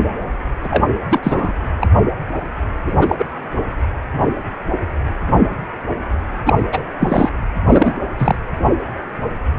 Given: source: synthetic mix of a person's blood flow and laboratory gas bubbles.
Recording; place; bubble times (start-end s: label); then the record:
Doppler ultrasound of blood flow; precordium
0.63-0.84 s: bubbles
1.10-1.19 s: bubbles
1.23-1.53 s: bubbles
1.80-1.87 s: bubbles
2.85-3.16 s: bubbles
3.19-3.26 s: bubbles
6.46-6.62 s: bubbles
6.72-6.86 s: bubbles
6.98-7.30 s: bubbles
7.66-7.96 s: bubbles
8.19-8.36 s: bubbles
From the record:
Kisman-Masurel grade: 223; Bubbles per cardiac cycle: several, 3 to 8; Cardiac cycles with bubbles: 10 to 50%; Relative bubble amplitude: loud (0.450 to 0.775); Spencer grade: 2 (many but less than half of the cardiac periods contain bubble signals, singularly or in groups); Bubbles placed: anywhere in the cardiac cycle